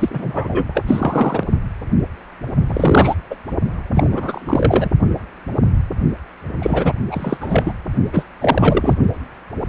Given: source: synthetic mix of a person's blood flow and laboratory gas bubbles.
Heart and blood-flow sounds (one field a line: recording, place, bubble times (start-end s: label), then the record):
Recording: Doppler ultrasound of blood flow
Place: precordium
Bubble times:
0.00-0.83 s: bubbles
0.87-1.44 s: bubbles
2.66-3.15 s: bubbles
3.30-3.36 s: bubbles
3.94-4.88 s: bubbles
6.62-6.93 s: bubbles
7.11-7.38 s: bubbles
7.41-7.73 s: bubbles
8.12-8.25 s: bubbles
8.40-8.96 s: bubbles
From the record:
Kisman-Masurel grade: 333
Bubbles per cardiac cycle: rolling drumbeat, 9 or more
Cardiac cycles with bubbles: 50 to 99%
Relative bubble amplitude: loud (0.450 to 0.775)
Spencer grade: 3 (all of the cardiac periods contain showers or single bubble signals, but not dominating or overriding the cardiac motion signals)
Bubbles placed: only in the low amplitude regions of the cardiac cycle